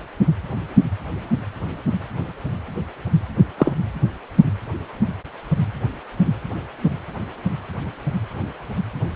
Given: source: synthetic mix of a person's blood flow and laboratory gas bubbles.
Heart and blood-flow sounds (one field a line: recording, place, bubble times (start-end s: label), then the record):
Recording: Doppler ultrasound of blood flow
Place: precordium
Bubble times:
3.58-3.73 s: bubbles
From the record:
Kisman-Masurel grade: 113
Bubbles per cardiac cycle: 1 to 2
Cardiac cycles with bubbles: 1 to 10%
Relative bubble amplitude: loud (0.450 to 0.775)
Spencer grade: 1 (occasional bubble signal discernible with the cardiac motion signal, with majority of cardiac periods free of bubbles)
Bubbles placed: anywhere in the cardiac cycle